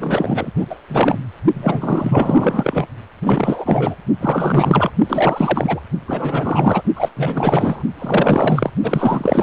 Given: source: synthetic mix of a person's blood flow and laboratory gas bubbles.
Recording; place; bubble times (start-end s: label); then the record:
Doppler ultrasound of blood flow; precordium
0.00-0.51 s: bubbles
0.56-0.66 s: bubbles
0.70-0.76 s: bubbles
0.89-1.18 s: bubbles
1.53-2.86 s: bubbles
3.23-3.95 s: bubbles
4.20-4.91 s: bubbles
5.04-5.81 s: bubbles
6.08-6.82 s: bubbles
6.96-7.09 s: bubbles
7.17-7.83 s: bubbles
7.98-8.71 s: bubbles
8.82-9.43 s: bubbles
From the record:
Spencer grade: 4 (maximum detectable bubble signal sounding continuously throughout systole and diastole of every cardiac period, and overriding the amplitude of the normal cardiac signals); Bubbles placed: only in the low amplitude regions of the cardiac cycle